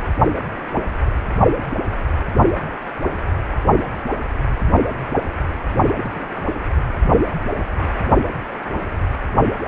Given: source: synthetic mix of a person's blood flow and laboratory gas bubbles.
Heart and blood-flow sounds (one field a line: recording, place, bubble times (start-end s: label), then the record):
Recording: Doppler ultrasound of blood flow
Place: precordium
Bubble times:
5.77-6.28 s: bubbles
6.31-6.45 s: bubbles
From the record:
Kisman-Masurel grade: 211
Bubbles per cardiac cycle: several, 3 to 8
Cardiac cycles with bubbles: 1 to 10%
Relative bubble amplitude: barely perceptible (0.100 to 0.250)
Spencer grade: 1 (occasional bubble signal discernible with the cardiac motion signal, with majority of cardiac periods free of bubbles)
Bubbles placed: anywhere in the cardiac cycle